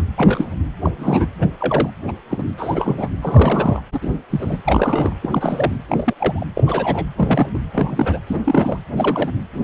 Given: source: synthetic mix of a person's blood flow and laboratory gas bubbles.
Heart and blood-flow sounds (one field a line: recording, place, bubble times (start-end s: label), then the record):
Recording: Doppler ultrasound of blood flow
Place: precordium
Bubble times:
0.00-0.02 s: bubbles
0.16-0.48 s: bubbles
0.83-0.91 s: bubbles
0.98-1.27 s: bubbles
1.42-1.46 s: bubbles
1.60-1.90 s: bubbles
2.07-2.11 s: bubbles
2.29-2.44 s: bubbles
2.57-3.08 s: bubbles
3.22-3.82 s: bubbles
3.92-3.99 s: bubbles
4.02-4.23 s: bubbles
4.30-4.56 s: bubbles
4.66-5.13 s: bubbles
5.22-5.72 s: bubbles
5.89-6.14 s: bubbles
6.19-6.45 s: bubbles
6.54-6.64 s: bubbles
6.66-7.06 s: bubbles
7.17-7.49 s: bubbles
7.54-7.59 s: bubbles
7.72-8.19 s: bubbles
8.26-8.39 s: bubbles
8.44-8.77 s: bubbles
8.96-9.32 s: bubbles
9.54-9.64 s: bubbles
From the record:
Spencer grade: 3 (all of the cardiac periods contain showers or single bubble signals, but not dominating or overriding the cardiac motion signals)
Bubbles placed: anywhere in the cardiac cycle